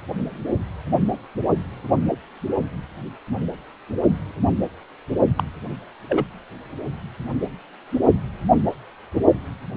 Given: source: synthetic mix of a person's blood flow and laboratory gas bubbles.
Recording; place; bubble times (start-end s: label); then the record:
Doppler ultrasound of blood flow; precordium
5.38-5.44 s: bubbles
6.09-6.25 s: bubbles
From the record:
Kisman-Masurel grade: 222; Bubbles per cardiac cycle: several, 3 to 8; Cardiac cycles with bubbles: 10 to 50%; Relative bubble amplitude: moderate (0.250 to 0.450); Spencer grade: 2 (many but less than half of the cardiac periods contain bubble signals, singularly or in groups); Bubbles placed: only in the low amplitude regions of the cardiac cycle